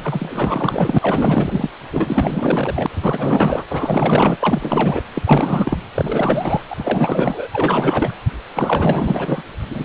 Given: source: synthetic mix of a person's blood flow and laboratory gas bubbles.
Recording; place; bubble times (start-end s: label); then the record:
Doppler ultrasound of blood flow; precordium
0.04-1.69 s: bubbles
1.92-3.65 s: bubbles
3.69-4.38 s: bubbles
4.43-5.03 s: bubbles
5.15-5.23 s: bubbles
5.26-5.78 s: bubbles
5.94-6.63 s: bubbles
6.70-7.48 s: bubbles
7.52-8.14 s: bubbles
8.54-9.43 s: bubbles
9.69-9.85 s: bubbles
From the record:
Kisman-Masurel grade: 444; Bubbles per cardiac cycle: continuous sound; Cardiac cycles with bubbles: 100%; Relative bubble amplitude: maximal (0.775 to 0.999); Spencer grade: 4 (maximum detectable bubble signal sounding continuously throughout systole and diastole of every cardiac period, and overriding the amplitude of the normal cardiac signals); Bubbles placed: anywhere in the cardiac cycle